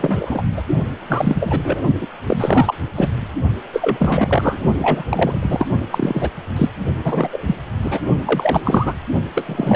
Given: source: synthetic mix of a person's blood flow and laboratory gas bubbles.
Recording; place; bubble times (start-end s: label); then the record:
Doppler ultrasound of blood flow; precordium
0.00-0.42 s: bubbles
0.56-0.62 s: bubbles
1.02-1.59 s: bubbles
1.62-1.81 s: bubbles
2.01-2.07 s: bubbles
2.24-2.73 s: bubbles
2.95-3.09 s: bubbles
3.73-4.58 s: bubbles
4.78-5.04 s: bubbles
5.09-5.67 s: bubbles
5.90-6.30 s: bubbles
6.56-6.69 s: bubbles
7.04-7.55 s: bubbles
7.82-8.01 s: bubbles
8.25-8.94 s: bubbles
9.36-9.76 s: bubbles
From the record:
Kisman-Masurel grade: 343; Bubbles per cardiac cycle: rolling drumbeat, 9 or more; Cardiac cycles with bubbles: 100%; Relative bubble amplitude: loud (0.450 to 0.775); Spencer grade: 3 (all of the cardiac periods contain showers or single bubble signals, but not dominating or overriding the cardiac motion signals); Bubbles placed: only in the low amplitude regions of the cardiac cycle